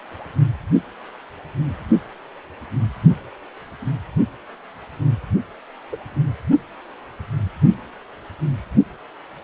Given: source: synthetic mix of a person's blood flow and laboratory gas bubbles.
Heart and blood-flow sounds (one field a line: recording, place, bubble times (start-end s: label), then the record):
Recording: Doppler ultrasound of blood flow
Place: precordium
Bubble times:
5.92-5.97 s: bubbles
From the record:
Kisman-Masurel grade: 112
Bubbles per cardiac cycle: 1 to 2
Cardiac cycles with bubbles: 1 to 10%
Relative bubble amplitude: moderate (0.250 to 0.450)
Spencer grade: 1 (occasional bubble signal discernible with the cardiac motion signal, with majority of cardiac periods free of bubbles)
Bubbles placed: only in the low amplitude regions of the cardiac cycle